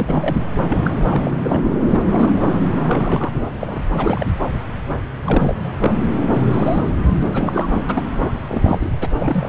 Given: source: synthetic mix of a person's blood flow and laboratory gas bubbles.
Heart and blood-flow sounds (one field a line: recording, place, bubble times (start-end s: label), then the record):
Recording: Doppler ultrasound of blood flow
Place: subclavian vein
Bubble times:
0.00-0.36 s: bubbles
0.68-0.78 s: bubbles
0.84-0.91 s: bubbles
1.09-1.59 s: bubbles
1.63-1.71 s: bubbles
1.85-2.00 s: bubbles
2.10-2.59 s: bubbles
2.71-3.30 s: bubbles
3.59-3.81 s: bubbles
3.89-4.26 s: bubbles
5.24-5.54 s: bubbles
5.76-5.95 s: bubbles
6.33-6.42 s: bubbles
6.50-6.90 s: bubbles
7.08-7.28 s: bubbles
7.33-7.69 s: bubbles
7.88-8.03 s: bubbles
8.22-8.32 s: bubbles
8.48-8.90 s: bubbles
9.00-9.07 s: bubbles
9.18-9.49 s: bubbles
From the record:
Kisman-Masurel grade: 342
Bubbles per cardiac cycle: rolling drumbeat, 9 or more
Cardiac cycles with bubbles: 100%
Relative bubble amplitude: moderate (0.250 to 0.450)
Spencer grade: 3 (all of the cardiac periods contain showers or single bubble signals, but not dominating or overriding the cardiac motion signals)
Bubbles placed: anywhere in the cardiac cycle